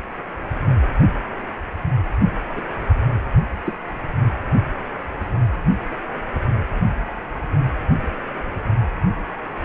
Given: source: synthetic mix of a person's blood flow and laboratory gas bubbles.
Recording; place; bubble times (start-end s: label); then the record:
Doppler ultrasound of blood flow; precordium
2.56-2.62 s: bubbles
3.66-3.75 s: bubbles
From the record:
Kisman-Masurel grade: 112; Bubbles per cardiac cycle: 1 to 2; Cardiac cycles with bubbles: 1 to 10%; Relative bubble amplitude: moderate (0.250 to 0.450); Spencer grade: 1 (occasional bubble signal discernible with the cardiac motion signal, with majority of cardiac periods free of bubbles); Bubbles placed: only in the low amplitude regions of the cardiac cycle